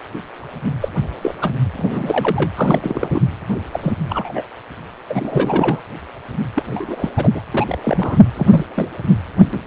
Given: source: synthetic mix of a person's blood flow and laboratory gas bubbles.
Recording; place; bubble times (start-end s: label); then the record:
Doppler ultrasound of blood flow; precordium
0.80-0.88 s: bubbles
1.22-1.34 s: bubbles
1.42-1.51 s: bubbles
1.77-2.51 s: bubbles
2.55-3.26 s: bubbles
3.71-3.79 s: bubbles
3.82-3.93 s: bubbles
4.09-4.42 s: bubbles
5.08-5.80 s: bubbles
6.55-7.11 s: bubbles
7.17-7.42 s: bubbles
7.53-7.77 s: bubbles
7.84-8.22 s: bubbles
8.34-8.66 s: bubbles
8.77-8.90 s: bubbles
From the record:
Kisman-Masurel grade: 242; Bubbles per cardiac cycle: several, 3 to 8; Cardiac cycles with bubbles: 100%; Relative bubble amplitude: moderate (0.250 to 0.450); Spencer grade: 3 (all of the cardiac periods contain showers or single bubble signals, but not dominating or overriding the cardiac motion signals); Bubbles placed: anywhere in the cardiac cycle